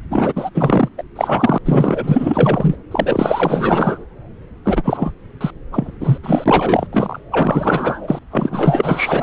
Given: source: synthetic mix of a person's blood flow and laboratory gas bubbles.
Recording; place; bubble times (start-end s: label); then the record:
Doppler ultrasound of blood flow; subclavian vein
0.10-0.33 s: bubbles
0.35-0.49 s: bubbles
0.54-0.89 s: bubbles
0.98-1.04 s: bubbles
1.16-1.58 s: bubbles
1.65-2.75 s: bubbles
2.91-4.05 s: bubbles
4.65-5.13 s: bubbles
5.41-5.50 s: bubbles
5.72-5.92 s: bubbles
6.00-6.18 s: bubbles
6.23-6.87 s: bubbles
6.92-7.20 s: bubbles
7.31-8.19 s: bubbles
8.31-9.23 s: bubbles
From the record:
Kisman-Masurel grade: 444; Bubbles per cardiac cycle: continuous sound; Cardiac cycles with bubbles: 100%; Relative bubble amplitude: maximal (0.775 to 0.999); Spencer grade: 4 (maximum detectable bubble signal sounding continuously throughout systole and diastole of every cardiac period, and overriding the amplitude of the normal cardiac signals); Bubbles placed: anywhere in the cardiac cycle